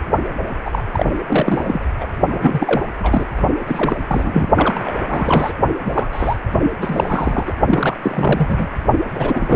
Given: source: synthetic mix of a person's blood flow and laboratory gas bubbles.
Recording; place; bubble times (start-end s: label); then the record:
Doppler ultrasound of blood flow; precordium
0.65-0.81 s: bubbles
0.91-1.13 s: bubbles
1.28-1.80 s: bubbles
2.00-2.06 s: bubbles
2.28-2.85 s: bubbles
2.98-3.26 s: bubbles
3.67-3.96 s: bubbles
4.08-4.49 s: bubbles
4.57-4.94 s: bubbles
5.08-5.54 s: bubbles
5.84-6.07 s: bubbles
6.12-6.38 s: bubbles
6.61-6.71 s: bubbles
6.81-7.53 s: bubbles
7.67-7.97 s: bubbles
8.02-8.68 s: bubbles
9.14-9.56 s: bubbles
From the record:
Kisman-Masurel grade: 342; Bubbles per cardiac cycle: rolling drumbeat, 9 or more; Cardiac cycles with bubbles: 100%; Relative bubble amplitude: moderate (0.250 to 0.450); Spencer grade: 3 (all of the cardiac periods contain showers or single bubble signals, but not dominating or overriding the cardiac motion signals); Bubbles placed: only in the low amplitude regions of the cardiac cycle